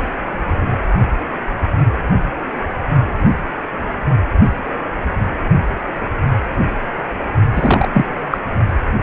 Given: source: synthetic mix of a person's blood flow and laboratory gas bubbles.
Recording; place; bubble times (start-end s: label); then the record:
Doppler ultrasound of blood flow; precordium
7.55-7.88 s: bubbles
7.94-8.12 s: bubbles
8.31-8.38 s: bubbles
From the record:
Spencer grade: 1 (occasional bubble signal discernible with the cardiac motion signal, with majority of cardiac periods free of bubbles); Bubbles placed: only in the low amplitude regions of the cardiac cycle